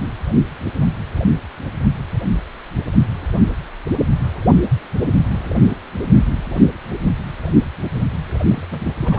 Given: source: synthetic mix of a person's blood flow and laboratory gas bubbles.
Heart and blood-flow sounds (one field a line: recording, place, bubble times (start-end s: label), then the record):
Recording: Doppler ultrasound of blood flow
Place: precordium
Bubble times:
8.49-8.65 s: bubbles
8.71-8.92 s: bubbles
8.95-9.19 s: bubbles
From the record:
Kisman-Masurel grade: 211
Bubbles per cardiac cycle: several, 3 to 8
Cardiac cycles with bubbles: 1 to 10%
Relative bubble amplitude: barely perceptible (0.100 to 0.250)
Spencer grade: 1 (occasional bubble signal discernible with the cardiac motion signal, with majority of cardiac periods free of bubbles)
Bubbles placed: anywhere in the cardiac cycle